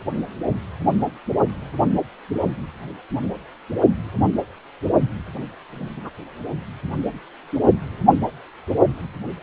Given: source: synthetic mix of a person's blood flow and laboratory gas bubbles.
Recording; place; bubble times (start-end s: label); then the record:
Doppler ultrasound of blood flow; precordium
5.74-5.91 s: bubbles
5.96-6.10 s: bubbles
From the record:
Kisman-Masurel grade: 111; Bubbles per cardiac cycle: 1 to 2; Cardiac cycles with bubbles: 1 to 10%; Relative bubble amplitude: barely perceptible (0.100 to 0.250); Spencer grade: 1 (occasional bubble signal discernible with the cardiac motion signal, with majority of cardiac periods free of bubbles); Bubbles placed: only in the low amplitude regions of the cardiac cycle